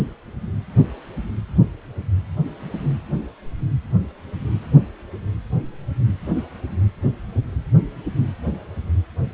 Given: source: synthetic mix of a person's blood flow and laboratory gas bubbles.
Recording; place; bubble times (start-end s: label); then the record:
Doppler ultrasound of blood flow; precordium
0.00-0.14 s: bubbles
From the record:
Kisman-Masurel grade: 111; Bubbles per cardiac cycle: 1 to 2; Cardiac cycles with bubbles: 1 to 10%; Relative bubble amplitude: barely perceptible (0.100 to 0.250); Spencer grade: 1 (occasional bubble signal discernible with the cardiac motion signal, with majority of cardiac periods free of bubbles); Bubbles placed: anywhere in the cardiac cycle